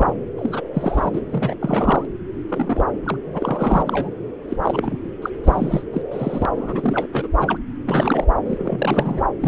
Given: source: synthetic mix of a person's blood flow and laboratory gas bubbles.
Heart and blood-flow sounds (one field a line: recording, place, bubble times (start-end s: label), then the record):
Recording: Doppler ultrasound of blood flow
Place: subclavian vein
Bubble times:
0.00-0.16 s: bubbles
0.38-0.61 s: bubbles
0.74-1.10 s: bubbles
1.13-1.21 s: bubbles
1.31-1.54 s: bubbles
1.60-2.06 s: bubbles
2.48-2.84 s: bubbles
3.06-3.17 s: bubbles
3.34-3.82 s: bubbles
3.85-4.09 s: bubbles
4.49-4.57 s: bubbles
4.62-4.99 s: bubbles
5.22-5.30 s: bubbles
5.44-5.84 s: bubbles
5.93-6.02 s: bubbles
6.11-6.46 s: bubbles
6.56-7.07 s: bubbles
7.12-7.28 s: bubbles
7.35-7.58 s: bubbles
7.87-8.25 s: bubbles
8.46-9.21 s: bubbles
9.40-9.48 s: bubbles
From the record:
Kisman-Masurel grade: 342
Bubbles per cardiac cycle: rolling drumbeat, 9 or more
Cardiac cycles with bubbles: 100%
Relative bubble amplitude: moderate (0.250 to 0.450)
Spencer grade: 3 (all of the cardiac periods contain showers or single bubble signals, but not dominating or overriding the cardiac motion signals)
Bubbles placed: anywhere in the cardiac cycle